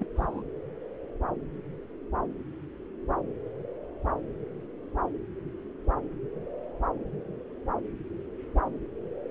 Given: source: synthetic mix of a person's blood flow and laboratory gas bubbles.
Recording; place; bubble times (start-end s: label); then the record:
Doppler ultrasound of blood flow; subclavian vein
0.00-0.05 s: bubbles
0.16-0.42 s: bubbles
From the record:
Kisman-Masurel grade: 211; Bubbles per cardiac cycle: several, 3 to 8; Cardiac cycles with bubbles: 1 to 10%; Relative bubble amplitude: barely perceptible (0.100 to 0.250); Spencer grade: 1 (occasional bubble signal discernible with the cardiac motion signal, with majority of cardiac periods free of bubbles); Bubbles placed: anywhere in the cardiac cycle